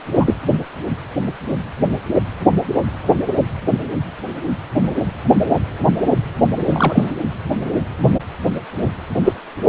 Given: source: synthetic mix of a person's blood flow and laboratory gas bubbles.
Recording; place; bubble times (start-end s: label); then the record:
Doppler ultrasound of blood flow; precordium
0.17-0.35 s: bubbles
6.69-7.12 s: bubbles
9.24-9.33 s: bubbles
From the record:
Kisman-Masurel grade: 123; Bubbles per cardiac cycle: 1 to 2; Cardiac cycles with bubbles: 10 to 50%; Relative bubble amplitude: loud (0.450 to 0.775); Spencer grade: 2 (many but less than half of the cardiac periods contain bubble signals, singularly or in groups); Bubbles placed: anywhere in the cardiac cycle